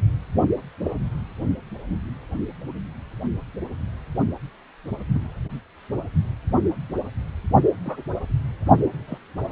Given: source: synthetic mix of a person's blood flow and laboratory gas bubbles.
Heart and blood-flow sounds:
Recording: Doppler ultrasound of blood flow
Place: precordium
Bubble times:
0.84-0.96 s: bubbles
5.13-5.21 s: bubbles
7.83-7.97 s: bubbles
9.07-9.18 s: bubbles
From the record:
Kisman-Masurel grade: 121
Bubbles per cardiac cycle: 1 to 2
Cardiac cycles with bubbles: 10 to 50%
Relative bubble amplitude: barely perceptible (0.100 to 0.250)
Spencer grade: 2 (many but less than half of the cardiac periods contain bubble signals, singularly or in groups)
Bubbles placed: only in the low amplitude regions of the cardiac cycle

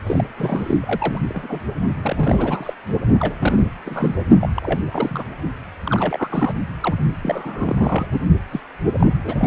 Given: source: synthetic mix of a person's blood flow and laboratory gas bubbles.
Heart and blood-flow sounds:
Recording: Doppler ultrasound of blood flow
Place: precordium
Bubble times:
0.07-0.24 s: bubbles
0.37-1.19 s: bubbles
1.28-1.59 s: bubbles
2.02-2.74 s: bubbles
3.20-3.35 s: bubbles
3.39-3.70 s: bubbles
3.86-4.15 s: bubbles
4.41-4.50 s: bubbles
4.54-4.80 s: bubbles
4.91-5.24 s: bubbles
5.85-6.56 s: bubbles
6.81-6.95 s: bubbles
7.21-8.06 s: bubbles
8.11-8.20 s: bubbles
8.51-8.60 s: bubbles
8.99-9.12 s: bubbles
9.24-9.35 s: bubbles
9.39-9.47 s: bubbles
From the record:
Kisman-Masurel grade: 332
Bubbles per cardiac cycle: rolling drumbeat, 9 or more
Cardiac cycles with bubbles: 50 to 99%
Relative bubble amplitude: moderate (0.250 to 0.450)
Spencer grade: 3 (all of the cardiac periods contain showers or single bubble signals, but not dominating or overriding the cardiac motion signals)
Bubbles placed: only in the low amplitude regions of the cardiac cycle

